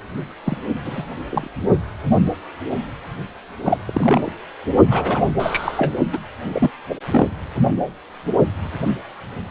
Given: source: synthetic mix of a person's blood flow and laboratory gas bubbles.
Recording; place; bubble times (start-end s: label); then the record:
Doppler ultrasound of blood flow; precordium
0.44-0.57 s: bubbles
0.84-1.03 s: bubbles
1.30-1.48 s: bubbles
3.63-3.77 s: bubbles
3.85-4.33 s: bubbles
4.90-5.33 s: bubbles
5.39-5.95 s: bubbles
6.12-6.19 s: bubbles
6.43-6.71 s: bubbles
6.89-6.95 s: bubbles
7.10-7.29 s: bubbles
From the record:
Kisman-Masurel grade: 233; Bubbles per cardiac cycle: several, 3 to 8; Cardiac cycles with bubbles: 50 to 99%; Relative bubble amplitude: loud (0.450 to 0.775); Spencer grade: 3 (all of the cardiac periods contain showers or single bubble signals, but not dominating or overriding the cardiac motion signals); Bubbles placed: only in the low amplitude regions of the cardiac cycle